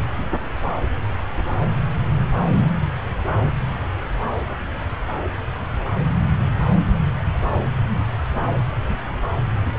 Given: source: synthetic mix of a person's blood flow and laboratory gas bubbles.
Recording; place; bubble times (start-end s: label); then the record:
Doppler ultrasound of blood flow; subclavian vein
9.76-9.79 s: bubbles
From the record:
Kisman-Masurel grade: 222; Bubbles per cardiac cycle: several, 3 to 8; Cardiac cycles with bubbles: 10 to 50%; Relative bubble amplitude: moderate (0.250 to 0.450); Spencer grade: 2 (many but less than half of the cardiac periods contain bubble signals, singularly or in groups); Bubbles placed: anywhere in the cardiac cycle